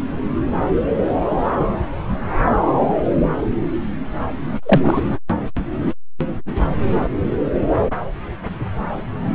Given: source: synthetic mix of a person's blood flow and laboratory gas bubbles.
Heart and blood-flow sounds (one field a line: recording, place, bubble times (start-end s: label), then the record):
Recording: Doppler ultrasound of blood flow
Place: subclavian vein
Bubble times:
4.62-5.01 s: bubbles
From the record:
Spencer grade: 1 (occasional bubble signal discernible with the cardiac motion signal, with majority of cardiac periods free of bubbles)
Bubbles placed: anywhere in the cardiac cycle